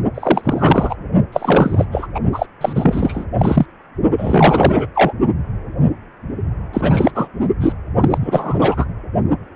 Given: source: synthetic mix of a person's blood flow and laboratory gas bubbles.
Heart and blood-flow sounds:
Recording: Doppler ultrasound of blood flow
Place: precordium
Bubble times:
0.14-0.96 s: bubbles
1.32-1.86 s: bubbles
1.91-2.07 s: bubbles
2.15-2.20 s: bubbles
2.32-2.46 s: bubbles
2.60-3.25 s: bubbles
3.38-3.66 s: bubbles
4.17-4.86 s: bubbles
4.95-5.12 s: bubbles
6.73-7.12 s: bubbles
7.15-7.28 s: bubbles
7.40-7.49 s: bubbles
7.61-7.73 s: bubbles
8.00-8.18 s: bubbles
8.21-8.85 s: bubbles
From the record:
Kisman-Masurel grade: 333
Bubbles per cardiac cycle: rolling drumbeat, 9 or more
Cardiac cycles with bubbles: 50 to 99%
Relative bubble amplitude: loud (0.450 to 0.775)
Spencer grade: 3 (all of the cardiac periods contain showers or single bubble signals, but not dominating or overriding the cardiac motion signals)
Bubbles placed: only in the low amplitude regions of the cardiac cycle

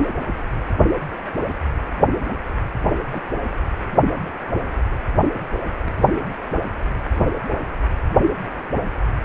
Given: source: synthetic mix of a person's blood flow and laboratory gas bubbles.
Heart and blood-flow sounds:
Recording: Doppler ultrasound of blood flow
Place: precordium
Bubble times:
3.11-3.21 s: bubbles
From the record:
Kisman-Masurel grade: 112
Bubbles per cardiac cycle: 1 to 2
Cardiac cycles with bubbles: 1 to 10%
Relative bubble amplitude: moderate (0.250 to 0.450)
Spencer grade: 1 (occasional bubble signal discernible with the cardiac motion signal, with majority of cardiac periods free of bubbles)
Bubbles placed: anywhere in the cardiac cycle

